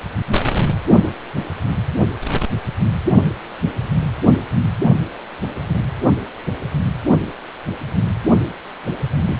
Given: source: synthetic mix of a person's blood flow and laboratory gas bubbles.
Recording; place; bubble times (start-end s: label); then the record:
Doppler ultrasound of blood flow; precordium
9.26-9.39 s: bubbles
From the record:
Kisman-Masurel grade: 211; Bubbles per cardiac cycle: several, 3 to 8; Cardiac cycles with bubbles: 1 to 10%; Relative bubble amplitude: barely perceptible (0.100 to 0.250); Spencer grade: 1 (occasional bubble signal discernible with the cardiac motion signal, with majority of cardiac periods free of bubbles); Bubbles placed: anywhere in the cardiac cycle